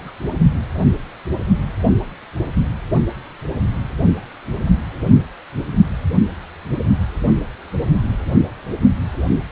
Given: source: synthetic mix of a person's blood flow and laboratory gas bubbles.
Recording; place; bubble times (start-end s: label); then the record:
Doppler ultrasound of blood flow; precordium
0.00-0.10 s: bubbles
From the record:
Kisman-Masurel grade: 111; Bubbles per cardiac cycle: 1 to 2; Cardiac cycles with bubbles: 1 to 10%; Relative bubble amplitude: barely perceptible (0.100 to 0.250); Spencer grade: 1 (occasional bubble signal discernible with the cardiac motion signal, with majority of cardiac periods free of bubbles); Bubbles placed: only in the low amplitude regions of the cardiac cycle